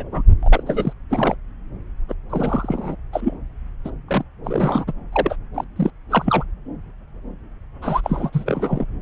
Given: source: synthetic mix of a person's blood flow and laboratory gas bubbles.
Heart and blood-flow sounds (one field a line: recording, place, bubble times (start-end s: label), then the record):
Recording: Doppler ultrasound of blood flow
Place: subclavian vein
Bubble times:
0.00-0.22 s: bubbles
0.42-0.63 s: bubbles
0.66-0.93 s: bubbles
1.09-1.35 s: bubbles
2.08-2.14 s: bubbles
2.29-2.96 s: bubbles
3.12-3.35 s: bubbles
3.84-3.91 s: bubbles
4.08-4.24 s: bubbles
4.43-4.84 s: bubbles
4.87-4.92 s: bubbles
5.12-5.36 s: bubbles
5.54-5.64 s: bubbles
5.76-5.91 s: bubbles
6.10-6.43 s: bubbles
7.82-8.01 s: bubbles
8.03-8.30 s: bubbles
8.32-8.85 s: bubbles
From the record:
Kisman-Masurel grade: 332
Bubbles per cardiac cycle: rolling drumbeat, 9 or more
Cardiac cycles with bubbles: 50 to 99%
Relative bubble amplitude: moderate (0.250 to 0.450)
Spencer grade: 3 (all of the cardiac periods contain showers or single bubble signals, but not dominating or overriding the cardiac motion signals)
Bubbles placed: anywhere in the cardiac cycle